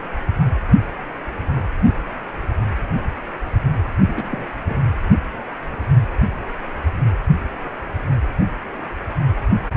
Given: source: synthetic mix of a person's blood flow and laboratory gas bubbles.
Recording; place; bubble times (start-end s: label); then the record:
Doppler ultrasound of blood flow; precordium
4.01-4.12 s: bubbles
4.15-4.46 s: bubbles
4.65-4.80 s: bubbles
From the record:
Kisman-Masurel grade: 211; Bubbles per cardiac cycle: several, 3 to 8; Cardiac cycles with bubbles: 1 to 10%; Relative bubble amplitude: barely perceptible (0.100 to 0.250); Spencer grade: 1 (occasional bubble signal discernible with the cardiac motion signal, with majority of cardiac periods free of bubbles); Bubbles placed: anywhere in the cardiac cycle